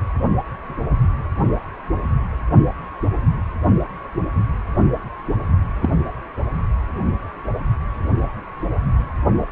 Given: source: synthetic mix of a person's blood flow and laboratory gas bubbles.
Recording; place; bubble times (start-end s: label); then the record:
Doppler ultrasound of blood flow; precordium
5.82-5.92 s: bubbles
From the record:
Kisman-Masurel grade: 123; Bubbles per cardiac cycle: 1 to 2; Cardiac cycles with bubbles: 10 to 50%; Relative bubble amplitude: loud (0.450 to 0.775); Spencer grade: 2 (many but less than half of the cardiac periods contain bubble signals, singularly or in groups); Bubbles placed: anywhere in the cardiac cycle